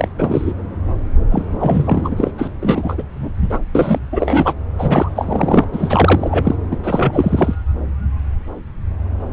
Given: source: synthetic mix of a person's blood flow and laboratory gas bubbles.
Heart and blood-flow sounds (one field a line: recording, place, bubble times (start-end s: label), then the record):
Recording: Doppler ultrasound of blood flow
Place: subclavian vein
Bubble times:
0.00-0.08 s: bubbles
0.18-0.54 s: bubbles
1.31-1.46 s: bubbles
1.60-2.31 s: bubbles
2.38-2.48 s: bubbles
2.61-2.95 s: bubbles
2.98-3.03 s: bubbles
3.19-3.31 s: bubbles
3.42-3.58 s: bubbles
3.74-3.98 s: bubbles
4.12-4.54 s: bubbles
4.78-5.09 s: bubbles
5.15-5.64 s: bubbles
5.72-6.55 s: bubbles
6.71-6.76 s: bubbles
6.83-7.55 s: bubbles
From the record:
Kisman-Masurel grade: 333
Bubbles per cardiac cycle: rolling drumbeat, 9 or more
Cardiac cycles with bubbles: 50 to 99%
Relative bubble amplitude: loud (0.450 to 0.775)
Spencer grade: 3 (all of the cardiac periods contain showers or single bubble signals, but not dominating or overriding the cardiac motion signals)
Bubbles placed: anywhere in the cardiac cycle